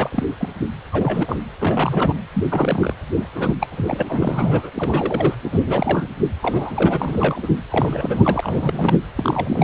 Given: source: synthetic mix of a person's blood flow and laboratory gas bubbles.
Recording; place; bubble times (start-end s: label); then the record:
Doppler ultrasound of blood flow; precordium
0.00-0.09 s: bubbles
0.11-0.26 s: bubbles
0.40-0.51 s: bubbles
0.91-1.38 s: bubbles
1.59-2.13 s: bubbles
2.35-2.44 s: bubbles
2.50-2.94 s: bubbles
3.16-3.27 s: bubbles
3.35-3.54 s: bubbles
3.60-3.67 s: bubbles
3.71-4.03 s: bubbles
4.08-4.70 s: bubbles
4.75-5.35 s: bubbles
5.45-6.08 s: bubbles
6.42-7.61 s: bubbles
7.70-8.97 s: bubbles
9.16-9.64 s: bubbles
From the record:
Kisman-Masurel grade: 342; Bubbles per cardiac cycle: rolling drumbeat, 9 or more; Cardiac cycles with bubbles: 100%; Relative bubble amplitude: moderate (0.250 to 0.450); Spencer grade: 3 (all of the cardiac periods contain showers or single bubble signals, but not dominating or overriding the cardiac motion signals); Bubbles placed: anywhere in the cardiac cycle